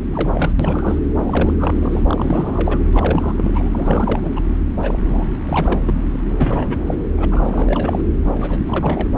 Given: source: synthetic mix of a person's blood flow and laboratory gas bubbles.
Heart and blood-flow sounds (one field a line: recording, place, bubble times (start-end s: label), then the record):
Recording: Doppler ultrasound of blood flow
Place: subclavian vein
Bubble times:
0.01-0.05 s: bubbles
0.13-0.30 s: bubbles
0.33-0.52 s: bubbles
0.59-0.99 s: bubbles
1.26-1.54 s: bubbles
1.57-2.01 s: bubbles
2.08-2.81 s: bubbles
2.93-4.20 s: bubbles
4.22-4.31 s: bubbles
4.35-4.42 s: bubbles
4.81-4.99 s: bubbles
5.05-5.29 s: bubbles
5.44-5.80 s: bubbles
5.85-5.94 s: bubbles
6.13-6.18 s: bubbles
6.35-6.96 s: bubbles
7.17-7.25 s: bubbles
7.30-8.03 s: bubbles
8.41-9.09 s: bubbles
From the record:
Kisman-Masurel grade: 342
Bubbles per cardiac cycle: rolling drumbeat, 9 or more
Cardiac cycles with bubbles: 100%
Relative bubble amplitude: moderate (0.250 to 0.450)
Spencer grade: 3 (all of the cardiac periods contain showers or single bubble signals, but not dominating or overriding the cardiac motion signals)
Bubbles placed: anywhere in the cardiac cycle